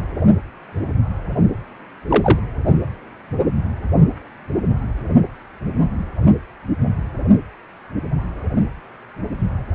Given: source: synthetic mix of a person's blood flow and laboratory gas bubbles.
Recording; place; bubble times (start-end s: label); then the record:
Doppler ultrasound of blood flow; precordium
2.08-2.39 s: bubbles
From the record:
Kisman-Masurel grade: 123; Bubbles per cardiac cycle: 1 to 2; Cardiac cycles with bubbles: 10 to 50%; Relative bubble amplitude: loud (0.450 to 0.775); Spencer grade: 2 (many but less than half of the cardiac periods contain bubble signals, singularly or in groups); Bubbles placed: only in the low amplitude regions of the cardiac cycle